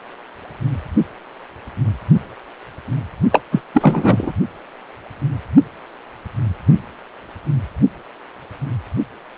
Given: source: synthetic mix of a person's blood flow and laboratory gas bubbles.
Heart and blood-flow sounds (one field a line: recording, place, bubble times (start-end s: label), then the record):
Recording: Doppler ultrasound of blood flow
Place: precordium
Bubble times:
3.31-3.41 s: bubbles
3.51-3.61 s: bubbles
3.74-4.32 s: bubbles
From the record:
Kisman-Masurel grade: 213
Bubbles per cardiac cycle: several, 3 to 8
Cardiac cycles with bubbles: 1 to 10%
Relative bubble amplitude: loud (0.450 to 0.775)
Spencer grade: 1 (occasional bubble signal discernible with the cardiac motion signal, with majority of cardiac periods free of bubbles)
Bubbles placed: only in the low amplitude regions of the cardiac cycle